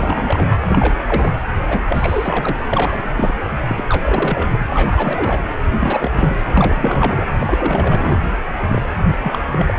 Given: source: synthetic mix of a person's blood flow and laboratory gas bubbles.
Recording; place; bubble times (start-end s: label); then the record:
Doppler ultrasound of blood flow; precordium
0.00-0.48 s: bubbles
0.67-1.33 s: bubbles
1.68-2.63 s: bubbles
2.67-3.44 s: bubbles
3.67-3.84 s: bubbles
3.87-4.01 s: bubbles
4.05-4.47 s: bubbles
4.50-4.67 s: bubbles
4.69-5.42 s: bubbles
5.72-6.11 s: bubbles
6.14-6.36 s: bubbles
6.45-7.26 s: bubbles
7.39-8.20 s: bubbles
8.62-8.89 s: bubbles
9.05-9.18 s: bubbles
9.22-9.38 s: bubbles
9.52-9.74 s: bubbles
From the record:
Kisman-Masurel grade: 342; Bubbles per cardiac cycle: rolling drumbeat, 9 or more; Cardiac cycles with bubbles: 100%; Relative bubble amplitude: moderate (0.250 to 0.450); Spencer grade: 3 (all of the cardiac periods contain showers or single bubble signals, but not dominating or overriding the cardiac motion signals); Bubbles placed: anywhere in the cardiac cycle